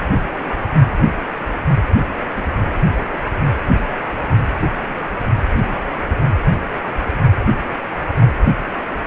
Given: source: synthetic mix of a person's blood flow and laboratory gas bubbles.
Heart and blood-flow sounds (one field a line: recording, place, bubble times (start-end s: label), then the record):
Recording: Doppler ultrasound of blood flow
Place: precordium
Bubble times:
2.35-2.58 s: bubbles
5.49-5.77 s: bubbles
6.12-6.16 s: bubbles
8.21-8.26 s: bubbles
8.93-9.00 s: bubbles
From the record:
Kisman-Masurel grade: 121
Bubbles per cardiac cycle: 1 to 2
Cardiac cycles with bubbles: 10 to 50%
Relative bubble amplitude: barely perceptible (0.100 to 0.250)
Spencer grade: 2 (many but less than half of the cardiac periods contain bubble signals, singularly or in groups)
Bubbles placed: anywhere in the cardiac cycle